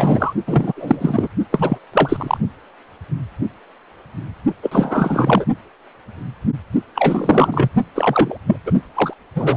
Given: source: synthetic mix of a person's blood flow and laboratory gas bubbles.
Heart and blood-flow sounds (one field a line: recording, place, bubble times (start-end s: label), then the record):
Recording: Doppler ultrasound of blood flow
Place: precordium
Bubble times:
0.00-0.33 s: bubbles
0.46-0.72 s: bubbles
0.77-1.28 s: bubbles
1.52-1.78 s: bubbles
1.94-2.38 s: bubbles
4.62-5.46 s: bubbles
6.95-7.69 s: bubbles
7.95-8.38 s: bubbles
8.46-8.57 s: bubbles
8.66-8.82 s: bubbles
8.95-9.13 s: bubbles
9.35-9.56 s: bubbles
From the record:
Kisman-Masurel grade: 333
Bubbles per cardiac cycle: rolling drumbeat, 9 or more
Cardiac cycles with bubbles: 50 to 99%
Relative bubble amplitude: loud (0.450 to 0.775)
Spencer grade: 3 (all of the cardiac periods contain showers or single bubble signals, but not dominating or overriding the cardiac motion signals)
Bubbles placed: only in the low amplitude regions of the cardiac cycle